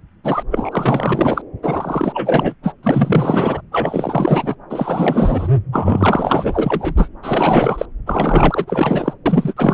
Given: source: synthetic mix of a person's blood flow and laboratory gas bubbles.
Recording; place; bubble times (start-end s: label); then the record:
Doppler ultrasound of blood flow; subclavian vein
0.24-0.43 s: bubbles
0.51-1.42 s: bubbles
1.62-2.54 s: bubbles
2.63-2.72 s: bubbles
2.83-3.62 s: bubbles
3.72-4.55 s: bubbles
4.70-5.48 s: bubbles
5.72-6.94 s: bubbles
6.97-7.08 s: bubbles
7.22-7.85 s: bubbles
8.06-9.13 s: bubbles
9.26-9.54 s: bubbles
9.57-9.74 s: bubbles
From the record:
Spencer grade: 4 (maximum detectable bubble signal sounding continuously throughout systole and diastole of every cardiac period, and overriding the amplitude of the normal cardiac signals); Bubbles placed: anywhere in the cardiac cycle